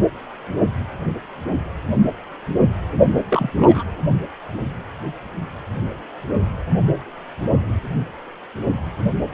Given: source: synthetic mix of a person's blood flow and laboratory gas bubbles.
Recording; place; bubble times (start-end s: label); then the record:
Doppler ultrasound of blood flow; precordium
3.28-3.51 s: bubbles
3.57-3.83 s: bubbles
From the record:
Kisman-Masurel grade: 212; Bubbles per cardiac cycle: several, 3 to 8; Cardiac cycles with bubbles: 1 to 10%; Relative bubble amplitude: moderate (0.250 to 0.450); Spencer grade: 1 (occasional bubble signal discernible with the cardiac motion signal, with majority of cardiac periods free of bubbles); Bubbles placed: only in the low amplitude regions of the cardiac cycle